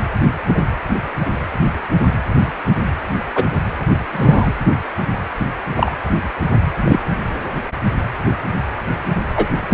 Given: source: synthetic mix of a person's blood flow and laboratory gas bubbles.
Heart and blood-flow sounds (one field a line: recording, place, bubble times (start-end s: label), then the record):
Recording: Doppler ultrasound of blood flow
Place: precordium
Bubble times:
0.47-0.63 s: bubbles
3.35-3.46 s: bubbles
4.12-4.53 s: bubbles
5.38-5.46 s: bubbles
5.76-5.92 s: bubbles
6.84-7.00 s: bubbles
9.35-9.47 s: bubbles
9.69-9.74 s: bubbles
From the record:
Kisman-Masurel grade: 123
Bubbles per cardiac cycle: 1 to 2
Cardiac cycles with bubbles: 10 to 50%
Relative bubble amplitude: loud (0.450 to 0.775)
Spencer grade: 2 (many but less than half of the cardiac periods contain bubble signals, singularly or in groups)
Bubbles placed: anywhere in the cardiac cycle